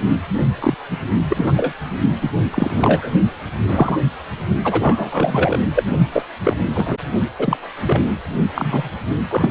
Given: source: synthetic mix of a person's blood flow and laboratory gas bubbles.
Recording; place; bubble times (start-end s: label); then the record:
Doppler ultrasound of blood flow; precordium
0.59-0.74 s: bubbles
0.90-0.97 s: bubbles
1.29-1.53 s: bubbles
1.56-1.73 s: bubbles
2.21-2.30 s: bubbles
2.50-3.11 s: bubbles
3.67-3.98 s: bubbles
4.63-5.59 s: bubbles
5.74-5.83 s: bubbles
6.12-6.23 s: bubbles
6.43-6.57 s: bubbles
6.74-6.95 s: bubbles
7.38-7.57 s: bubbles
7.86-8.01 s: bubbles
8.54-8.89 s: bubbles
9.30-9.51 s: bubbles
From the record:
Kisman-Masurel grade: 233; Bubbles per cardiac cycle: several, 3 to 8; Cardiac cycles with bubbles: 50 to 99%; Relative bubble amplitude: loud (0.450 to 0.775); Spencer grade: 3 (all of the cardiac periods contain showers or single bubble signals, but not dominating or overriding the cardiac motion signals); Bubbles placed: only in the low amplitude regions of the cardiac cycle